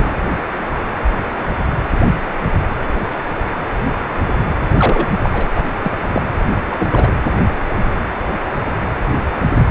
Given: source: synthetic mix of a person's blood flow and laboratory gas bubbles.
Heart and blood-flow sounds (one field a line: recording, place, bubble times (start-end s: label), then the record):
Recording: Doppler ultrasound of blood flow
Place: precordium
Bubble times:
0.00-0.15 s: bubbles
4.62-5.08 s: bubbles
5.23-5.47 s: bubbles
5.56-5.64 s: bubbles
5.84-5.91 s: bubbles
6.07-6.22 s: bubbles
6.64-7.15 s: bubbles
From the record:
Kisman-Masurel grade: 222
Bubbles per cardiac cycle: several, 3 to 8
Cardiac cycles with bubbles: 10 to 50%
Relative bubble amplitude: moderate (0.250 to 0.450)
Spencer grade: 2 (many but less than half of the cardiac periods contain bubble signals, singularly or in groups)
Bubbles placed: anywhere in the cardiac cycle